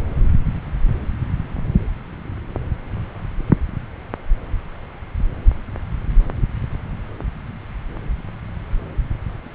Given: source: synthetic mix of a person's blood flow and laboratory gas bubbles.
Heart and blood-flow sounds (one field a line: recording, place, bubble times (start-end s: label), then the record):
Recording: Doppler ultrasound of blood flow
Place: subclavian vein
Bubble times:
no bubbles
From the record:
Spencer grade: 0 (complete lack of bubble signals)